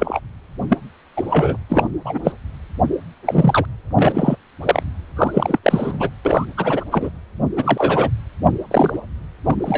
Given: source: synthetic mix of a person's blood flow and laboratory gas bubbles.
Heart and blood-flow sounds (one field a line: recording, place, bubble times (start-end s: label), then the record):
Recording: Doppler ultrasound of blood flow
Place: precordium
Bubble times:
0.00-0.20 s: bubbles
0.69-0.78 s: bubbles
1.17-1.57 s: bubbles
1.70-1.89 s: bubbles
2.05-2.19 s: bubbles
2.24-2.32 s: bubbles
3.25-3.66 s: bubbles
3.96-4.36 s: bubbles
4.63-4.83 s: bubbles
5.16-5.59 s: bubbles
5.63-6.09 s: bubbles
6.25-6.45 s: bubbles
6.57-6.84 s: bubbles
6.91-7.11 s: bubbles
7.56-8.09 s: bubbles
8.71-8.99 s: bubbles
9.44-9.56 s: bubbles
9.58-9.78 s: bubbles
From the record:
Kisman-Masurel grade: 233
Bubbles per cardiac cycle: several, 3 to 8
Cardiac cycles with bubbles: 50 to 99%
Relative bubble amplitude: loud (0.450 to 0.775)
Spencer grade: 3 (all of the cardiac periods contain showers or single bubble signals, but not dominating or overriding the cardiac motion signals)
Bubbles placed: anywhere in the cardiac cycle